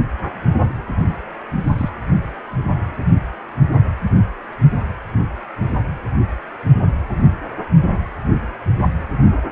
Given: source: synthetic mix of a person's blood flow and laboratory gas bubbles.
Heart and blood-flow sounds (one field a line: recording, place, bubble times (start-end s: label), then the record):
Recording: Doppler ultrasound of blood flow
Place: precordium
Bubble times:
1.06-1.16 s: bubbles
1.64-1.90 s: bubbles
From the record:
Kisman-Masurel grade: 212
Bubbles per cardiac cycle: several, 3 to 8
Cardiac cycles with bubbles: 1 to 10%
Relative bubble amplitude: moderate (0.250 to 0.450)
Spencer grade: 1 (occasional bubble signal discernible with the cardiac motion signal, with majority of cardiac periods free of bubbles)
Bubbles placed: anywhere in the cardiac cycle